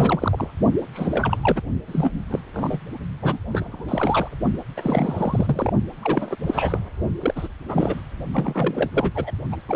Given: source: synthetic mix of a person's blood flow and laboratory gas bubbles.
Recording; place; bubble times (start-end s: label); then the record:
Doppler ultrasound of blood flow; precordium
0.00-0.53 s: bubbles
0.93-1.37 s: bubbles
1.43-1.61 s: bubbles
1.88-2.11 s: bubbles
2.29-2.40 s: bubbles
2.53-2.78 s: bubbles
3.22-3.38 s: bubbles
3.51-4.36 s: bubbles
4.77-5.73 s: bubbles
6.02-6.36 s: bubbles
6.47-6.79 s: bubbles
7.20-7.48 s: bubbles
7.69-8.01 s: bubbles
8.33-8.89 s: bubbles
8.92-9.11 s: bubbles
9.14-9.31 s: bubbles
9.52-9.56 s: bubbles
9.68-9.76 s: bubbles
From the record:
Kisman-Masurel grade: 342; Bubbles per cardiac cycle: rolling drumbeat, 9 or more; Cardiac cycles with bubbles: 100%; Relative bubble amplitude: moderate (0.250 to 0.450); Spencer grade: 3 (all of the cardiac periods contain showers or single bubble signals, but not dominating or overriding the cardiac motion signals); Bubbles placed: only in the low amplitude regions of the cardiac cycle